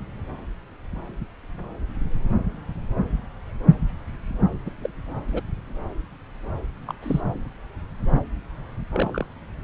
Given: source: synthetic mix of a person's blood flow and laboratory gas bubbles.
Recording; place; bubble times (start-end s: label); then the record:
Doppler ultrasound of blood flow; subclavian vein
4.65-4.70 s: bubbles
4.82-4.89 s: bubbles
5.27-5.41 s: bubbles
6.87-6.94 s: bubbles
7.02-7.21 s: bubbles
8.90-9.26 s: bubbles
From the record:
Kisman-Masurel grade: 121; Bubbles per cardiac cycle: 1 to 2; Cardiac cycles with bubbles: 10 to 50%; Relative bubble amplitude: barely perceptible (0.100 to 0.250); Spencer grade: 2 (many but less than half of the cardiac periods contain bubble signals, singularly or in groups); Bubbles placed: anywhere in the cardiac cycle